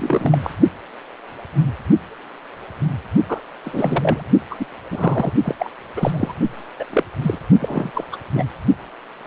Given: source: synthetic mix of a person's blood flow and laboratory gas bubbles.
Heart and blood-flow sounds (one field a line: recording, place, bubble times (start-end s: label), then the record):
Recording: Doppler ultrasound of blood flow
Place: precordium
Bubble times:
0.00-0.38 s: bubbles
0.42-0.50 s: bubbles
3.28-3.40 s: bubbles
3.64-4.23 s: bubbles
4.50-4.55 s: bubbles
4.59-4.66 s: bubbles
4.91-5.33 s: bubbles
5.43-5.55 s: bubbles
5.58-5.71 s: bubbles
5.96-6.10 s: bubbles
6.14-6.34 s: bubbles
6.79-6.85 s: bubbles
6.89-7.04 s: bubbles
7.21-7.38 s: bubbles
7.60-7.91 s: bubbles
7.93-8.04 s: bubbles
8.12-8.17 s: bubbles
8.34-8.46 s: bubbles
From the record:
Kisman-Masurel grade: 232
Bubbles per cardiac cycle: several, 3 to 8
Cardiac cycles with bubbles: 50 to 99%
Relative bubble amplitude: moderate (0.250 to 0.450)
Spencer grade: 3 (all of the cardiac periods contain showers or single bubble signals, but not dominating or overriding the cardiac motion signals)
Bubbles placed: only in the low amplitude regions of the cardiac cycle